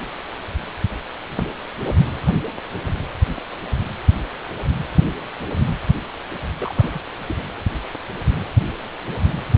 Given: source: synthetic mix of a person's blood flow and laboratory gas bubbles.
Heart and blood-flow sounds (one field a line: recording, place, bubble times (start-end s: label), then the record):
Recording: Doppler ultrasound of blood flow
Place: precordium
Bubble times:
6.59-7.09 s: bubbles
7.26-7.36 s: bubbles
From the record:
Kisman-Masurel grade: 211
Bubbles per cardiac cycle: several, 3 to 8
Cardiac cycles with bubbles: 1 to 10%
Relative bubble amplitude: barely perceptible (0.100 to 0.250)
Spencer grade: 1 (occasional bubble signal discernible with the cardiac motion signal, with majority of cardiac periods free of bubbles)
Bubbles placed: anywhere in the cardiac cycle